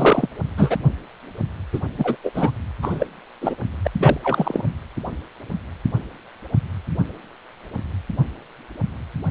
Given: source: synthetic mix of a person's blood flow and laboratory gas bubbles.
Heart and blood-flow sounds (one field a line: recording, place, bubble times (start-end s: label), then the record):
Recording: Doppler ultrasound of blood flow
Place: precordium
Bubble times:
0.00-0.29 s: bubbles
0.56-0.77 s: bubbles
1.73-1.79 s: bubbles
1.98-2.17 s: bubbles
2.23-2.30 s: bubbles
2.34-2.51 s: bubbles
2.82-3.06 s: bubbles
3.41-3.54 s: bubbles
3.84-3.87 s: bubbles
4.00-4.18 s: bubbles
4.24-4.65 s: bubbles
From the record:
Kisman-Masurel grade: 223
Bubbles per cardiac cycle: several, 3 to 8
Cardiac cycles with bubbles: 10 to 50%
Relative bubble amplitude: loud (0.450 to 0.775)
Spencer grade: 2 (many but less than half of the cardiac periods contain bubble signals, singularly or in groups)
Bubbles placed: anywhere in the cardiac cycle